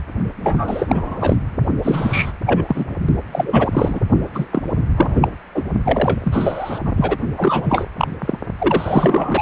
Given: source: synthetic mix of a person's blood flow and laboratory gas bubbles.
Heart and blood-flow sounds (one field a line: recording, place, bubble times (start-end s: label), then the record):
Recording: Doppler ultrasound of blood flow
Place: precordium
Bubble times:
0.43-0.86 s: bubbles
0.89-1.38 s: bubbles
1.83-2.33 s: bubbles
2.46-2.85 s: bubbles
3.32-4.00 s: bubbles
4.34-4.83 s: bubbles
4.96-5.35 s: bubbles
5.54-5.63 s: bubbles
5.85-6.79 s: bubbles
6.84-6.92 s: bubbles
6.96-7.17 s: bubbles
7.37-7.85 s: bubbles
7.98-8.08 s: bubbles
8.20-8.38 s: bubbles
8.59-9.42 s: bubbles
From the record:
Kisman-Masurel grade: 343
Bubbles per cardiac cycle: rolling drumbeat, 9 or more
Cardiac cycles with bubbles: 100%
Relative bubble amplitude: loud (0.450 to 0.775)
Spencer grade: 3 (all of the cardiac periods contain showers or single bubble signals, but not dominating or overriding the cardiac motion signals)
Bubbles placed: only in the low amplitude regions of the cardiac cycle